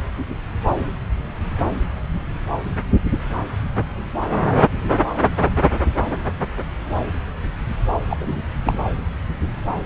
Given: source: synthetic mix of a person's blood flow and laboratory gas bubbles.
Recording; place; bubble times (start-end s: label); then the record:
Doppler ultrasound of blood flow; subclavian vein
8.10-8.41 s: bubbles
8.65-8.74 s: bubbles
From the record:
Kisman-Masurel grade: 212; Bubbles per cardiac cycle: several, 3 to 8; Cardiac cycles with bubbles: 1 to 10%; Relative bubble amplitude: moderate (0.250 to 0.450); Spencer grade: 1 (occasional bubble signal discernible with the cardiac motion signal, with majority of cardiac periods free of bubbles); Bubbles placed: anywhere in the cardiac cycle